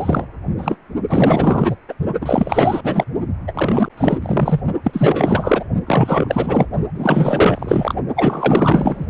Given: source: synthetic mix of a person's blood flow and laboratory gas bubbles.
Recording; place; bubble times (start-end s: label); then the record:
Doppler ultrasound of blood flow; precordium
0.00-0.25 s: bubbles
0.57-0.76 s: bubbles
1.08-1.76 s: bubbles
1.89-1.94 s: bubbles
2.21-2.81 s: bubbles
2.83-3.04 s: bubbles
3.47-3.89 s: bubbles
3.97-4.18 s: bubbles
4.22-4.60 s: bubbles
4.83-5.64 s: bubbles
5.86-6.65 s: bubbles
6.94-7.94 s: bubbles
8.16-9.07 s: bubbles
From the record:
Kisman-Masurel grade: 444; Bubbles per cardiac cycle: continuous sound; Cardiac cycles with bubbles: 100%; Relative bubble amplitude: maximal (0.775 to 0.999); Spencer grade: 4 (maximum detectable bubble signal sounding continuously throughout systole and diastole of every cardiac period, and overriding the amplitude of the normal cardiac signals); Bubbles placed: only in the low amplitude regions of the cardiac cycle